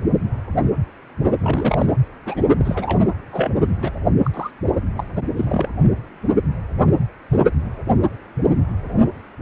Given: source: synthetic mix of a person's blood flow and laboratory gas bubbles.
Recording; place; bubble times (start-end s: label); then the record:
Doppler ultrasound of blood flow; precordium
1.41-1.96 s: bubbles
2.25-2.42 s: bubbles
2.57-3.08 s: bubbles
3.32-3.52 s: bubbles
3.82-3.91 s: bubbles
4.24-4.30 s: bubbles
4.33-4.50 s: bubbles
4.96-5.04 s: bubbles
5.16-5.24 s: bubbles
5.37-5.69 s: bubbles
From the record:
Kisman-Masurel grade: 232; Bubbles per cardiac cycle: several, 3 to 8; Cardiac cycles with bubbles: 50 to 99%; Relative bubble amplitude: moderate (0.250 to 0.450); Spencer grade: 3 (all of the cardiac periods contain showers or single bubble signals, but not dominating or overriding the cardiac motion signals); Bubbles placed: only in the low amplitude regions of the cardiac cycle